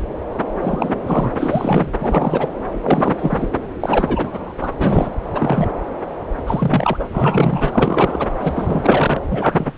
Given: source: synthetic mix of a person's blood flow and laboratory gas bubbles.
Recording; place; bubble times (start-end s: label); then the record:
Doppler ultrasound of blood flow; subclavian vein
0.61-0.94 s: bubbles
1.06-1.33 s: bubbles
1.38-1.92 s: bubbles
1.99-2.48 s: bubbles
2.82-3.48 s: bubbles
3.80-4.53 s: bubbles
4.59-4.76 s: bubbles
4.79-5.09 s: bubbles
5.33-5.67 s: bubbles
6.46-7.04 s: bubbles
7.12-8.28 s: bubbles
8.41-9.21 s: bubbles
9.31-9.72 s: bubbles
From the record:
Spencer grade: 3 (all of the cardiac periods contain showers or single bubble signals, but not dominating or overriding the cardiac motion signals); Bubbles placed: anywhere in the cardiac cycle